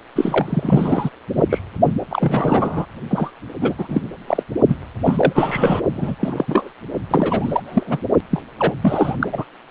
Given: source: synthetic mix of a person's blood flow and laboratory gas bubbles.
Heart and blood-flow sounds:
Doppler ultrasound of blood flow; precordium
0.15-1.10 s: bubbles
1.36-1.43 s: bubbles
1.50-1.59 s: bubbles
2.10-2.86 s: bubbles
3.10-3.31 s: bubbles
3.60-3.73 s: bubbles
3.78-4.01 s: bubbles
4.26-4.43 s: bubbles
4.67-4.76 s: bubbles
5.04-5.80 s: bubbles
5.94-6.16 s: bubbles
6.19-6.72 s: bubbles
7.10-7.62 s: bubbles
7.66-8.02 s: bubbles
8.31-8.42 s: bubbles
8.59-8.74 s: bubbles
8.81-9.14 s: bubbles
9.20-9.29 s: bubbles
9.32-9.45 s: bubbles
From the record:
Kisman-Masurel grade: 343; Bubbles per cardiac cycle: rolling drumbeat, 9 or more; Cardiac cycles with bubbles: 100%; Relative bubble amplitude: loud (0.450 to 0.775); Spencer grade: 3 (all of the cardiac periods contain showers or single bubble signals, but not dominating or overriding the cardiac motion signals); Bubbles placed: only in the low amplitude regions of the cardiac cycle

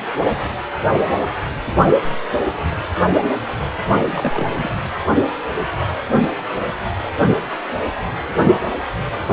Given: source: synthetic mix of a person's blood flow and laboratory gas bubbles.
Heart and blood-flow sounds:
Doppler ultrasound of blood flow; precordium
3.92-4.76 s: bubbles
From the record:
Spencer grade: 1 (occasional bubble signal discernible with the cardiac motion signal, with majority of cardiac periods free of bubbles); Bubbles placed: anywhere in the cardiac cycle

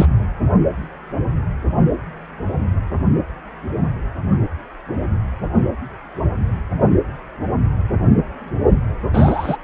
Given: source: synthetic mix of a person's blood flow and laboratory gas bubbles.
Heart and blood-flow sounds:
Doppler ultrasound of blood flow; precordium
0.00-0.05 s: bubbles
9.13-9.57 s: bubbles
From the record:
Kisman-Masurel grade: 123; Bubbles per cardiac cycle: 1 to 2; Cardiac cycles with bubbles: 10 to 50%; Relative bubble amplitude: loud (0.450 to 0.775); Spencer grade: 2 (many but less than half of the cardiac periods contain bubble signals, singularly or in groups); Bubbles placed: only in the low amplitude regions of the cardiac cycle

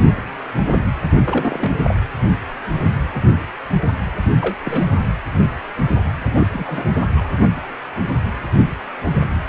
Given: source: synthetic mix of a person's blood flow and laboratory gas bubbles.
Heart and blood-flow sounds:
Doppler ultrasound of blood flow; precordium
1.24-1.76 s: bubbles
1.84-1.96 s: bubbles
4.41-4.56 s: bubbles
4.64-4.85 s: bubbles
6.31-6.46 s: bubbles
6.52-6.92 s: bubbles
6.96-7.12 s: bubbles
7.17-7.27 s: bubbles
From the record:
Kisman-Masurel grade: 222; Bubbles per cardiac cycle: several, 3 to 8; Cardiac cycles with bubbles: 10 to 50%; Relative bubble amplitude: moderate (0.250 to 0.450); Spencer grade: 2 (many but less than half of the cardiac periods contain bubble signals, singularly or in groups); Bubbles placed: anywhere in the cardiac cycle

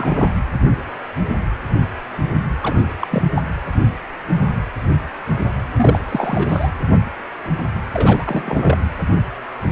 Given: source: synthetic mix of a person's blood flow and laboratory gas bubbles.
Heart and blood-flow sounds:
Doppler ultrasound of blood flow; precordium
0.00-0.31 s: bubbles
2.63-2.78 s: bubbles
3.00-3.08 s: bubbles
3.10-3.23 s: bubbles
3.34-3.42 s: bubbles
5.76-5.99 s: bubbles
6.09-6.71 s: bubbles
7.93-8.78 s: bubbles
From the record:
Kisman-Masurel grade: 222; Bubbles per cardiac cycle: several, 3 to 8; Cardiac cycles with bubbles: 10 to 50%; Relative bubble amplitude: moderate (0.250 to 0.450); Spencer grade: 2 (many but less than half of the cardiac periods contain bubble signals, singularly or in groups); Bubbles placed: anywhere in the cardiac cycle

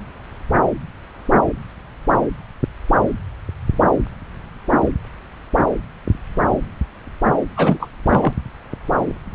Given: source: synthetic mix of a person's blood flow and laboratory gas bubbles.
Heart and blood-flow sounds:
Doppler ultrasound of blood flow; subclavian vein
7.57-7.90 s: bubbles
8.07-8.33 s: bubbles
From the record:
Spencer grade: 1 (occasional bubble signal discernible with the cardiac motion signal, with majority of cardiac periods free of bubbles); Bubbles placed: anywhere in the cardiac cycle

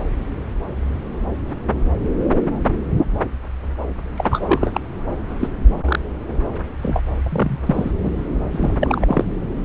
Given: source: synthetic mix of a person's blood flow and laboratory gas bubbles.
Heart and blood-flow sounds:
Doppler ultrasound of blood flow; subclavian vein
4.17-4.81 s: bubbles
5.40-5.48 s: bubbles
5.85-5.99 s: bubbles
6.83-7.00 s: bubbles
7.23-7.60 s: bubbles
7.66-7.91 s: bubbles
8.03-8.11 s: bubbles
8.52-8.74 s: bubbles
8.80-9.25 s: bubbles
From the record:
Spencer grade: 3 (all of the cardiac periods contain showers or single bubble signals, but not dominating or overriding the cardiac motion signals); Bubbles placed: anywhere in the cardiac cycle

